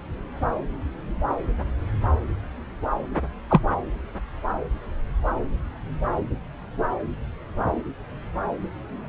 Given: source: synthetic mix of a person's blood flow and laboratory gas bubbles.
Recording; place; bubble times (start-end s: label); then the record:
Doppler ultrasound of blood flow; subclavian vein
3.50-3.60 s: bubbles
From the record:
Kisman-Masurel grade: 113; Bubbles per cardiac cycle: 1 to 2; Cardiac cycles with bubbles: 1 to 10%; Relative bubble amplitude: loud (0.450 to 0.775); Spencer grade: 1 (occasional bubble signal discernible with the cardiac motion signal, with majority of cardiac periods free of bubbles); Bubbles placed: anywhere in the cardiac cycle